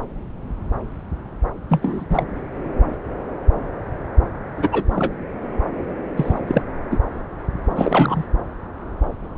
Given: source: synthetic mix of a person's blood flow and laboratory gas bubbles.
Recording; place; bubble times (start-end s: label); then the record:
Doppler ultrasound of blood flow; subclavian vein
1.69-2.05 s: bubbles
2.09-2.25 s: bubbles
4.58-4.69 s: bubbles
4.72-4.84 s: bubbles
4.90-5.14 s: bubbles
6.17-6.41 s: bubbles
6.47-6.63 s: bubbles
6.91-6.98 s: bubbles
7.70-8.25 s: bubbles
From the record:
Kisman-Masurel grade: 222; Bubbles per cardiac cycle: several, 3 to 8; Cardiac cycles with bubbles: 10 to 50%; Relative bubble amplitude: moderate (0.250 to 0.450); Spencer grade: 2 (many but less than half of the cardiac periods contain bubble signals, singularly or in groups); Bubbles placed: anywhere in the cardiac cycle